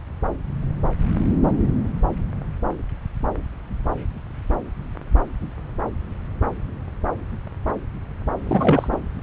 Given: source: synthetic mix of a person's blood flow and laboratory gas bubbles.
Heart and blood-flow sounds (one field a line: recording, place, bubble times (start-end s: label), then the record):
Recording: Doppler ultrasound of blood flow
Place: subclavian vein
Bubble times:
8.44-8.88 s: bubbles
8.92-8.96 s: bubbles
From the record:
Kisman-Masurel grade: 212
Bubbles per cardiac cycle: several, 3 to 8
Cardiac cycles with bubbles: 1 to 10%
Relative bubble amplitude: moderate (0.250 to 0.450)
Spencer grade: 1 (occasional bubble signal discernible with the cardiac motion signal, with majority of cardiac periods free of bubbles)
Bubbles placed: anywhere in the cardiac cycle